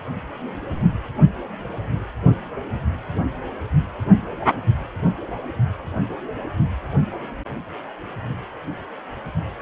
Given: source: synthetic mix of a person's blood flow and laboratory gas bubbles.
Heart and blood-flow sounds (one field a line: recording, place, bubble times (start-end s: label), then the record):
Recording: Doppler ultrasound of blood flow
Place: precordium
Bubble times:
no bubbles
From the record:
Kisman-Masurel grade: 000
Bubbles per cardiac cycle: 0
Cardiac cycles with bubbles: 0%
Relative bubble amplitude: no bubbles discernible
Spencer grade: 0 (complete lack of bubble signals)